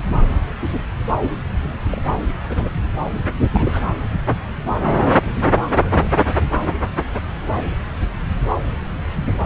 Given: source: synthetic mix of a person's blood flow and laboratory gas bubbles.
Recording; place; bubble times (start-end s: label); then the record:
Doppler ultrasound of blood flow; subclavian vein
1.22-1.30 s: bubbles
1.91-2.02 s: bubbles
2.06-2.14 s: bubbles
2.49-2.70 s: bubbles
3.52-3.81 s: bubbles
5.76-6.12 s: bubbles
From the record:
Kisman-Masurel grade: 221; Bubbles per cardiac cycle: several, 3 to 8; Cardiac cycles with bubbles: 10 to 50%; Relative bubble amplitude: barely perceptible (0.100 to 0.250); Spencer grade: 2 (many but less than half of the cardiac periods contain bubble signals, singularly or in groups); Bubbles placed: anywhere in the cardiac cycle